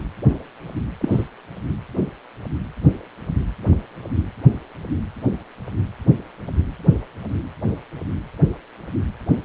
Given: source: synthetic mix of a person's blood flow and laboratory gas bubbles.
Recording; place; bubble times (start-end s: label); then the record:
Doppler ultrasound of blood flow; precordium
1.00-1.28 s: bubbles
From the record:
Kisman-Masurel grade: 112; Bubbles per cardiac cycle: 1 to 2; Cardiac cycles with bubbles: 1 to 10%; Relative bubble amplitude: moderate (0.250 to 0.450); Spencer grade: 1 (occasional bubble signal discernible with the cardiac motion signal, with majority of cardiac periods free of bubbles); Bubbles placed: anywhere in the cardiac cycle